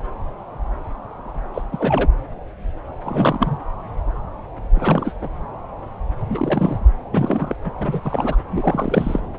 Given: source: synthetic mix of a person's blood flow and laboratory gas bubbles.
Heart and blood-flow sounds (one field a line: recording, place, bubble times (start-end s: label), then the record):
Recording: Doppler ultrasound of blood flow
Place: subclavian vein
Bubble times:
1.54-1.61 s: bubbles
1.72-2.09 s: bubbles
3.04-3.58 s: bubbles
4.74-5.14 s: bubbles
5.21-5.28 s: bubbles
6.29-6.78 s: bubbles
7.12-7.56 s: bubbles
7.65-7.71 s: bubbles
7.77-8.36 s: bubbles
8.51-9.29 s: bubbles
From the record:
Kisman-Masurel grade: 332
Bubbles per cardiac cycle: rolling drumbeat, 9 or more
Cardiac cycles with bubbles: 50 to 99%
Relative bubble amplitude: moderate (0.250 to 0.450)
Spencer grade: 3 (all of the cardiac periods contain showers or single bubble signals, but not dominating or overriding the cardiac motion signals)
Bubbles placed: anywhere in the cardiac cycle